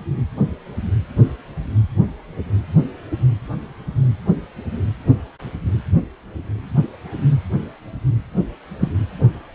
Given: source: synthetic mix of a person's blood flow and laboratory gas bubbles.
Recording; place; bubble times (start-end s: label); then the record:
Doppler ultrasound of blood flow; precordium
8.80-8.89 s: bubbles
From the record:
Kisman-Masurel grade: 113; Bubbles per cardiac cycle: 1 to 2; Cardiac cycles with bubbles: 1 to 10%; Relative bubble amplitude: loud (0.450 to 0.775); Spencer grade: 1 (occasional bubble signal discernible with the cardiac motion signal, with majority of cardiac periods free of bubbles); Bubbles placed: anywhere in the cardiac cycle